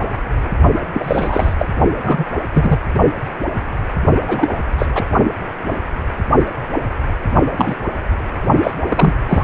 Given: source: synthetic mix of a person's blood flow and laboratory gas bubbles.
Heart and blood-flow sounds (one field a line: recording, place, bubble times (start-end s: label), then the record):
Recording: Doppler ultrasound of blood flow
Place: precordium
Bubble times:
0.94-1.55 s: bubbles
1.59-1.66 s: bubbles
2.02-2.25 s: bubbles
2.54-2.79 s: bubbles
4.27-4.48 s: bubbles
4.78-4.86 s: bubbles
4.94-5.05 s: bubbles
7.57-7.75 s: bubbles
8.63-8.72 s: bubbles
8.88-9.13 s: bubbles
9.29-9.44 s: bubbles
From the record:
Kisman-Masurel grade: 233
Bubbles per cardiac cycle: several, 3 to 8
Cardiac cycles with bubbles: 50 to 99%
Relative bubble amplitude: loud (0.450 to 0.775)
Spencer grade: 3 (all of the cardiac periods contain showers or single bubble signals, but not dominating or overriding the cardiac motion signals)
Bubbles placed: only in the low amplitude regions of the cardiac cycle